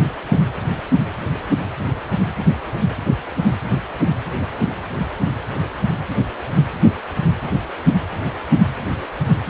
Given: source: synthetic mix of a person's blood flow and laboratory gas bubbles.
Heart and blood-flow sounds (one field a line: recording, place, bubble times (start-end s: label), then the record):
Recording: Doppler ultrasound of blood flow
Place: precordium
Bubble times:
no bubbles
From the record:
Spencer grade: 0 (complete lack of bubble signals)